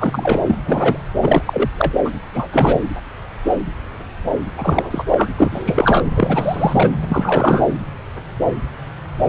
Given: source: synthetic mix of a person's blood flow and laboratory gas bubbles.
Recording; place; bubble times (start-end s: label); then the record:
Doppler ultrasound of blood flow; subclavian vein
0.00-0.38 s: bubbles
0.46-0.56 s: bubbles
0.65-0.98 s: bubbles
1.21-1.42 s: bubbles
1.46-1.69 s: bubbles
1.78-1.93 s: bubbles
2.04-2.11 s: bubbles
2.33-2.48 s: bubbles
2.52-2.81 s: bubbles
4.57-5.04 s: bubbles
5.11-5.29 s: bubbles
5.38-6.03 s: bubbles
6.16-6.92 s: bubbles
7.08-7.64 s: bubbles
From the record:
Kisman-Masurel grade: 333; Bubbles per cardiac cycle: rolling drumbeat, 9 or more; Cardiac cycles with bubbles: 50 to 99%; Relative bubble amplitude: loud (0.450 to 0.775); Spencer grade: 3 (all of the cardiac periods contain showers or single bubble signals, but not dominating or overriding the cardiac motion signals); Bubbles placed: anywhere in the cardiac cycle